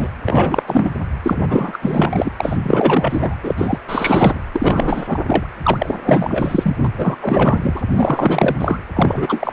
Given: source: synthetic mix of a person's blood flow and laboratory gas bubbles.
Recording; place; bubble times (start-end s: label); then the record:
Doppler ultrasound of blood flow; precordium
0.00-0.09 s: bubbles
0.26-0.63 s: bubbles
0.66-0.94 s: bubbles
1.22-2.30 s: bubbles
2.36-2.58 s: bubbles
2.63-3.35 s: bubbles
3.42-3.54 s: bubbles
3.57-3.78 s: bubbles
3.87-4.40 s: bubbles
4.54-5.19 s: bubbles
5.27-5.46 s: bubbles
5.62-6.76 s: bubbles
6.84-6.91 s: bubbles
6.96-7.16 s: bubbles
7.21-7.82 s: bubbles
7.96-8.80 s: bubbles
8.94-9.53 s: bubbles
From the record:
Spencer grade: 4 (maximum detectable bubble signal sounding continuously throughout systole and diastole of every cardiac period, and overriding the amplitude of the normal cardiac signals); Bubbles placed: anywhere in the cardiac cycle